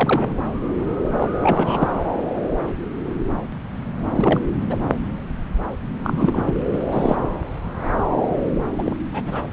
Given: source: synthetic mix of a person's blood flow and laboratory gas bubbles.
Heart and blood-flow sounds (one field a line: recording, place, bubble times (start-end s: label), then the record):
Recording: Doppler ultrasound of blood flow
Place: subclavian vein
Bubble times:
0.00-0.34 s: bubbles
1.20-1.31 s: bubbles
1.40-1.96 s: bubbles
4.16-4.44 s: bubbles
4.70-4.77 s: bubbles
6.03-6.43 s: bubbles
6.46-6.62 s: bubbles
6.71-6.79 s: bubbles
6.89-7.16 s: bubbles
8.79-8.96 s: bubbles
9.12-9.45 s: bubbles
From the record:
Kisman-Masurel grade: 222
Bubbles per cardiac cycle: several, 3 to 8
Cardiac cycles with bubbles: 10 to 50%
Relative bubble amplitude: moderate (0.250 to 0.450)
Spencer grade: 2 (many but less than half of the cardiac periods contain bubble signals, singularly or in groups)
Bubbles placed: anywhere in the cardiac cycle